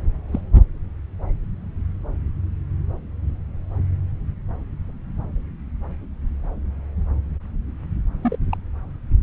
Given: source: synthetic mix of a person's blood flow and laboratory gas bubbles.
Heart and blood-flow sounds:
Doppler ultrasound of blood flow; subclavian vein
0.32-0.41 s: bubbles
8.22-8.36 s: bubbles
8.52-8.58 s: bubbles
From the record:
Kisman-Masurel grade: 121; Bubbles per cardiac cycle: 1 to 2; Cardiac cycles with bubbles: 10 to 50%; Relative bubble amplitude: barely perceptible (0.100 to 0.250); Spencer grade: 2 (many but less than half of the cardiac periods contain bubble signals, singularly or in groups); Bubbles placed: anywhere in the cardiac cycle

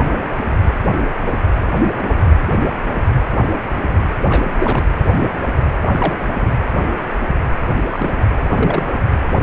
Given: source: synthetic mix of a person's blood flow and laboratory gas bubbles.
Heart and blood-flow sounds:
Doppler ultrasound of blood flow; precordium
4.29-4.83 s: bubbles
5.82-6.29 s: bubbles
6.33-6.38 s: bubbles
6.41-6.47 s: bubbles
7.90-8.10 s: bubbles
8.37-8.91 s: bubbles
9.38-9.42 s: bubbles
From the record:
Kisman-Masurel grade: 222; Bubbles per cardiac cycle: several, 3 to 8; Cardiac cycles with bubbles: 10 to 50%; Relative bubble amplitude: moderate (0.250 to 0.450); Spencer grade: 2 (many but less than half of the cardiac periods contain bubble signals, singularly or in groups); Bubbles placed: anywhere in the cardiac cycle

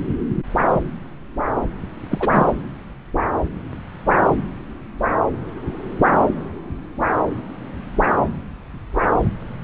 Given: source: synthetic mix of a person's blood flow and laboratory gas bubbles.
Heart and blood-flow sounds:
Doppler ultrasound of blood flow; subclavian vein
2.10-2.47 s: bubbles
From the record:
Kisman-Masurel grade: 222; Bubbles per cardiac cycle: several, 3 to 8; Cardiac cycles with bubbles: 10 to 50%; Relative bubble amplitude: moderate (0.250 to 0.450); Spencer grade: 2 (many but less than half of the cardiac periods contain bubble signals, singularly or in groups); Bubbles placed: anywhere in the cardiac cycle

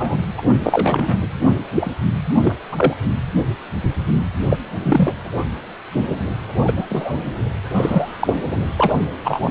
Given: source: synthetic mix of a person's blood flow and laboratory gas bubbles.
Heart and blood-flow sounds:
Doppler ultrasound of blood flow; precordium
0.00-0.18 s: bubbles
0.38-0.42 s: bubbles
0.63-1.19 s: bubbles
1.75-1.90 s: bubbles
2.41-2.55 s: bubbles
2.71-2.93 s: bubbles
4.50-4.58 s: bubbles
4.82-5.13 s: bubbles
6.65-6.73 s: bubbles
6.77-6.86 s: bubbles
6.88-7.25 s: bubbles
7.66-7.69 s: bubbles
7.74-8.35 s: bubbles
8.77-8.93 s: bubbles
9.23-9.50 s: bubbles
From the record:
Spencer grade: 3 (all of the cardiac periods contain showers or single bubble signals, but not dominating or overriding the cardiac motion signals); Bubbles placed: anywhere in the cardiac cycle

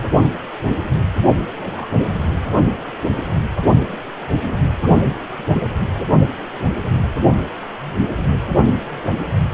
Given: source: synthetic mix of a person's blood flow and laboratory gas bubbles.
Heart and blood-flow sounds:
Doppler ultrasound of blood flow; precordium
1.55-1.88 s: bubbles
1.97-2.04 s: bubbles
From the record:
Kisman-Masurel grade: 111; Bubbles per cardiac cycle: 1 to 2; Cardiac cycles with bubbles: 1 to 10%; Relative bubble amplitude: barely perceptible (0.100 to 0.250); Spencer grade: 1 (occasional bubble signal discernible with the cardiac motion signal, with majority of cardiac periods free of bubbles); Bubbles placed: only in the low amplitude regions of the cardiac cycle

